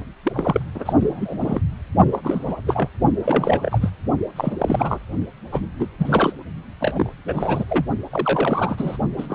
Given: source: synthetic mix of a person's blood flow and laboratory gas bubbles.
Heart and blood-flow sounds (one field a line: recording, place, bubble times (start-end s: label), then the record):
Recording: Doppler ultrasound of blood flow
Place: precordium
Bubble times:
0.23-0.66 s: bubbles
0.74-0.93 s: bubbles
1.00-1.61 s: bubbles
2.12-2.20 s: bubbles
2.23-2.55 s: bubbles
2.66-2.88 s: bubbles
3.25-3.60 s: bubbles
3.62-3.89 s: bubbles
4.36-4.53 s: bubbles
4.58-4.99 s: bubbles
5.51-5.61 s: bubbles
5.79-5.87 s: bubbles
5.99-6.33 s: bubbles
6.80-7.11 s: bubbles
7.28-7.64 s: bubbles
7.68-7.86 s: bubbles
8.11-8.97 s: bubbles
9.18-9.35 s: bubbles
From the record:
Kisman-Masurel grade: 342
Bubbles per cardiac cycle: rolling drumbeat, 9 or more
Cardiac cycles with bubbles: 100%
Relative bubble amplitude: moderate (0.250 to 0.450)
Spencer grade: 3 (all of the cardiac periods contain showers or single bubble signals, but not dominating or overriding the cardiac motion signals)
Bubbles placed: only in the low amplitude regions of the cardiac cycle